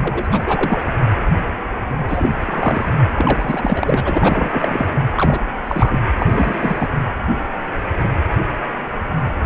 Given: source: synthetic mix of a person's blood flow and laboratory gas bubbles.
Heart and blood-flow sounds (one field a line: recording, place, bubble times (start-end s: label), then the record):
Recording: Doppler ultrasound of blood flow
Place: precordium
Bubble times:
0.00-0.83 s: bubbles
2.08-2.33 s: bubbles
2.40-2.92 s: bubbles
3.17-4.89 s: bubbles
5.10-5.43 s: bubbles
5.64-6.00 s: bubbles
6.19-6.27 s: bubbles
6.30-6.88 s: bubbles
From the record:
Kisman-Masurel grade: 332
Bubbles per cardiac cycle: rolling drumbeat, 9 or more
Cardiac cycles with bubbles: 50 to 99%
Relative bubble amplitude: moderate (0.250 to 0.450)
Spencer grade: 3 (all of the cardiac periods contain showers or single bubble signals, but not dominating or overriding the cardiac motion signals)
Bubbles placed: anywhere in the cardiac cycle